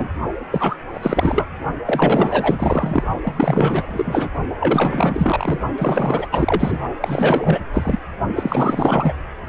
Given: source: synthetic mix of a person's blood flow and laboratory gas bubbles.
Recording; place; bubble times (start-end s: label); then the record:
Doppler ultrasound of blood flow; precordium
0.00-0.08 s: bubbles
0.51-0.77 s: bubbles
0.92-1.46 s: bubbles
1.85-3.04 s: bubbles
3.23-4.29 s: bubbles
4.59-5.59 s: bubbles
5.78-6.28 s: bubbles
6.31-6.78 s: bubbles
7.01-7.66 s: bubbles
7.74-7.99 s: bubbles
8.35-9.12 s: bubbles
From the record:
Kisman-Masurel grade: 444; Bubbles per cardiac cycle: continuous sound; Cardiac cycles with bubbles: 100%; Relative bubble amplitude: maximal (0.775 to 0.999); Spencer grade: 4 (maximum detectable bubble signal sounding continuously throughout systole and diastole of every cardiac period, and overriding the amplitude of the normal cardiac signals); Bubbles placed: only in the low amplitude regions of the cardiac cycle